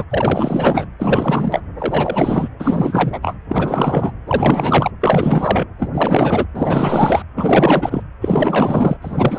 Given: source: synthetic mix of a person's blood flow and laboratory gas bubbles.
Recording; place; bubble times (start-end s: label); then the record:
Doppler ultrasound of blood flow; precordium
0.00-0.04 s: bubbles
0.09-0.87 s: bubbles
0.99-1.61 s: bubbles
1.78-2.48 s: bubbles
2.59-3.36 s: bubbles
3.49-4.12 s: bubbles
4.27-4.91 s: bubbles
5.00-5.67 s: bubbles
5.79-5.90 s: bubbles
5.93-6.46 s: bubbles
6.55-7.22 s: bubbles
7.37-8.03 s: bubbles
8.21-8.97 s: bubbles
9.01-9.39 s: bubbles
From the record:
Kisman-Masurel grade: 444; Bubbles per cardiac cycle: continuous sound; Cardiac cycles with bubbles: 100%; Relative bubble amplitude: maximal (0.775 to 0.999); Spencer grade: 4 (maximum detectable bubble signal sounding continuously throughout systole and diastole of every cardiac period, and overriding the amplitude of the normal cardiac signals); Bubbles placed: anywhere in the cardiac cycle